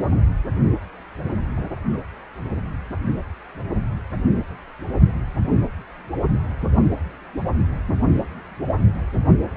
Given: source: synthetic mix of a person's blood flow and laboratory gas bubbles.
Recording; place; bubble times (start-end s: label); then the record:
Doppler ultrasound of blood flow; precordium
1.56-1.60 s: bubbles
1.92-1.98 s: bubbles
From the record:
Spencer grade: 1 (occasional bubble signal discernible with the cardiac motion signal, with majority of cardiac periods free of bubbles); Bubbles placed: anywhere in the cardiac cycle